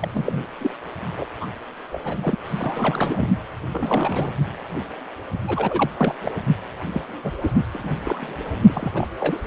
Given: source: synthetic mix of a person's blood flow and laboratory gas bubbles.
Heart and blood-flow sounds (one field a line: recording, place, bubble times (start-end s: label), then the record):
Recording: Doppler ultrasound of blood flow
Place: precordium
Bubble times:
0.00-0.08 s: bubbles
0.14-0.43 s: bubbles
0.60-0.74 s: bubbles
1.18-1.25 s: bubbles
1.41-1.46 s: bubbles
1.92-1.99 s: bubbles
2.04-2.17 s: bubbles
2.21-2.38 s: bubbles
2.44-3.28 s: bubbles
3.72-4.30 s: bubbles
5.47-5.90 s: bubbles
5.97-6.15 s: bubbles
6.22-6.35 s: bubbles
6.94-7.02 s: bubbles
7.23-7.32 s: bubbles
7.42-7.51 s: bubbles
7.73-7.96 s: bubbles
8.04-8.50 s: bubbles
8.60-8.92 s: bubbles
8.95-9.07 s: bubbles
9.20-9.38 s: bubbles
From the record:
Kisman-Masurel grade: 232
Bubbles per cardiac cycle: several, 3 to 8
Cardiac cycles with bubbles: 50 to 99%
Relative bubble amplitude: moderate (0.250 to 0.450)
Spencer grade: 3 (all of the cardiac periods contain showers or single bubble signals, but not dominating or overriding the cardiac motion signals)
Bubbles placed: anywhere in the cardiac cycle